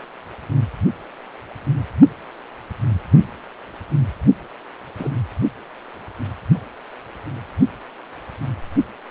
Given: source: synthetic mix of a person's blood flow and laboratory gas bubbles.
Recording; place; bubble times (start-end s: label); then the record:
Doppler ultrasound of blood flow; precordium
4.98-5.08 s: bubbles
From the record:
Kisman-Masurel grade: 112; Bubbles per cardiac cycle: 1 to 2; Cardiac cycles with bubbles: 1 to 10%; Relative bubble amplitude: moderate (0.250 to 0.450); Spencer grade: 1 (occasional bubble signal discernible with the cardiac motion signal, with majority of cardiac periods free of bubbles); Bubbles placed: only in the low amplitude regions of the cardiac cycle